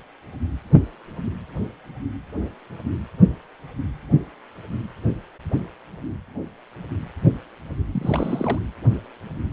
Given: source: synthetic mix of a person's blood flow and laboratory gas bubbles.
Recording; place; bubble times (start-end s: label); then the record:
Doppler ultrasound of blood flow; precordium
7.92-8.59 s: bubbles
From the record:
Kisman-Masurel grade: 211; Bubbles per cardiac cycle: several, 3 to 8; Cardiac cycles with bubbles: 1 to 10%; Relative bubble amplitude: barely perceptible (0.100 to 0.250); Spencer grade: 1 (occasional bubble signal discernible with the cardiac motion signal, with majority of cardiac periods free of bubbles); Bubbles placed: anywhere in the cardiac cycle